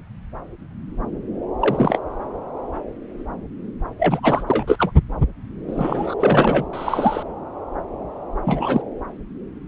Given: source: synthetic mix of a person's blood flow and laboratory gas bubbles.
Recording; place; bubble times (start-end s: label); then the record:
Doppler ultrasound of blood flow; subclavian vein
1.62-1.99 s: bubbles
3.99-4.43 s: bubbles
4.46-4.91 s: bubbles
5.67-6.15 s: bubbles
6.19-6.65 s: bubbles
6.73-7.23 s: bubbles
8.44-8.82 s: bubbles
From the record:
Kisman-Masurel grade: 222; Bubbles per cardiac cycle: several, 3 to 8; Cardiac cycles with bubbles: 10 to 50%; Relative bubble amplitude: moderate (0.250 to 0.450); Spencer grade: 2 (many but less than half of the cardiac periods contain bubble signals, singularly or in groups); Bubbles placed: anywhere in the cardiac cycle